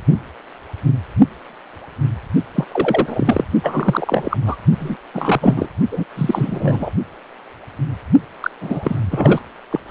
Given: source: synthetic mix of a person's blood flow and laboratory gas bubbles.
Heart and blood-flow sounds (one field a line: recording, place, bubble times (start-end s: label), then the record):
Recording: Doppler ultrasound of blood flow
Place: precordium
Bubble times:
2.55-2.65 s: bubbles
2.72-3.45 s: bubbles
3.63-4.37 s: bubbles
4.46-4.56 s: bubbles
4.79-4.96 s: bubbles
5.13-5.68 s: bubbles
5.92-6.04 s: bubbles
6.16-6.91 s: bubbles
8.40-8.51 s: bubbles
8.61-9.00 s: bubbles
9.11-9.42 s: bubbles
9.71-9.80 s: bubbles
9.89-9.91 s: bubbles
From the record:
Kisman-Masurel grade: 333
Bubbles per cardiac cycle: rolling drumbeat, 9 or more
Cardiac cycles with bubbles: 50 to 99%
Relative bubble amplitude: loud (0.450 to 0.775)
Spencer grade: 3 (all of the cardiac periods contain showers or single bubble signals, but not dominating or overriding the cardiac motion signals)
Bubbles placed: only in the low amplitude regions of the cardiac cycle